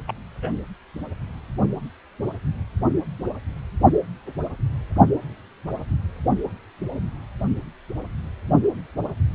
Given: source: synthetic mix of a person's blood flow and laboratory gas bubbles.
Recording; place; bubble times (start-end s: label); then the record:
Doppler ultrasound of blood flow; precordium
0.07-0.12 s: bubbles
0.42-0.51 s: bubbles
From the record:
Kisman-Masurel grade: 111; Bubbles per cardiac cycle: 1 to 2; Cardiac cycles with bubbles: 1 to 10%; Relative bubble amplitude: barely perceptible (0.100 to 0.250); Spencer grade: 1 (occasional bubble signal discernible with the cardiac motion signal, with majority of cardiac periods free of bubbles); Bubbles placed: only in the low amplitude regions of the cardiac cycle